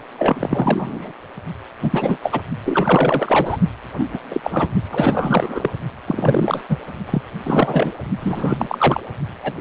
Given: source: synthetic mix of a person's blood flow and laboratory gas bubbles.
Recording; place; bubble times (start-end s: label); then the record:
Doppler ultrasound of blood flow; precordium
0.18-1.12 s: bubbles
1.82-2.17 s: bubbles
2.21-2.41 s: bubbles
2.64-3.57 s: bubbles
3.97-4.10 s: bubbles
4.13-4.18 s: bubbles
4.30-4.67 s: bubbles
4.90-5.71 s: bubbles
6.08-6.62 s: bubbles
6.69-6.77 s: bubbles
7.05-7.22 s: bubbles
7.43-7.92 s: bubbles
8.20-9.01 s: bubbles
9.43-9.54 s: bubbles
From the record:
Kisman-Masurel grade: 343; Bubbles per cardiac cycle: rolling drumbeat, 9 or more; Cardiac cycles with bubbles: 100%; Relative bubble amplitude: loud (0.450 to 0.775); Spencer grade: 3 (all of the cardiac periods contain showers or single bubble signals, but not dominating or overriding the cardiac motion signals); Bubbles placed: only in the low amplitude regions of the cardiac cycle